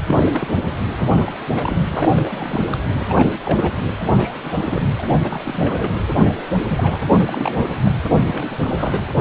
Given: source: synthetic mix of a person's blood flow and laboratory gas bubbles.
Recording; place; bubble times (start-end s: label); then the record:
Doppler ultrasound of blood flow; precordium
0.00-0.48 s: bubbles
0.67-0.74 s: bubbles
0.96-1.44 s: bubbles
1.47-1.79 s: bubbles
1.91-2.10 s: bubbles
2.12-2.61 s: bubbles
2.66-2.77 s: bubbles
2.91-3.40 s: bubbles
3.44-3.89 s: bubbles
4.15-4.35 s: bubbles
4.43-4.82 s: bubbles
4.98-5.03 s: bubbles
5.22-5.94 s: bubbles
6.07-6.41 s: bubbles
6.69-6.98 s: bubbles
7.12-7.92 s: bubbles
8.26-9.02 s: bubbles
9.14-9.21 s: bubbles
From the record:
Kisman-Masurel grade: 342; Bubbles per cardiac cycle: rolling drumbeat, 9 or more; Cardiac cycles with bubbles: 100%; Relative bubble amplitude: moderate (0.250 to 0.450); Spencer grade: 3 (all of the cardiac periods contain showers or single bubble signals, but not dominating or overriding the cardiac motion signals); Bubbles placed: anywhere in the cardiac cycle